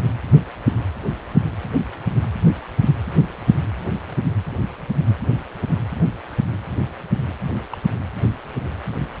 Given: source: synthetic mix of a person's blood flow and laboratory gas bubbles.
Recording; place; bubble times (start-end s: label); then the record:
Doppler ultrasound of blood flow; precordium
7.72-7.78 s: bubbles
From the record:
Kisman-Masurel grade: 111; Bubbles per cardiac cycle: 1 to 2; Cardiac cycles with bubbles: 1 to 10%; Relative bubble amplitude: barely perceptible (0.100 to 0.250); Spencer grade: 1 (occasional bubble signal discernible with the cardiac motion signal, with majority of cardiac periods free of bubbles); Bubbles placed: anywhere in the cardiac cycle